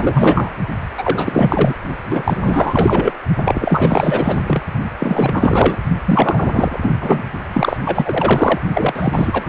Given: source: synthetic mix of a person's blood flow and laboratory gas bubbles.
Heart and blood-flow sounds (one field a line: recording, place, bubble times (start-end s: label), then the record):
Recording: Doppler ultrasound of blood flow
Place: precordium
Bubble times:
0.00-0.52 s: bubbles
0.97-1.73 s: bubbles
2.07-3.12 s: bubbles
3.38-4.62 s: bubbles
5.00-5.77 s: bubbles
6.06-6.79 s: bubbles
6.82-6.94 s: bubbles
7.01-7.22 s: bubbles
7.54-7.77 s: bubbles
7.83-8.59 s: bubbles
8.74-9.49 s: bubbles
From the record:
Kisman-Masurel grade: 444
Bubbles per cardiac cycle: continuous sound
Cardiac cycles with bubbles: 100%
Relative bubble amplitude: maximal (0.775 to 0.999)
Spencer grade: 4 (maximum detectable bubble signal sounding continuously throughout systole and diastole of every cardiac period, and overriding the amplitude of the normal cardiac signals)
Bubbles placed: only in the low amplitude regions of the cardiac cycle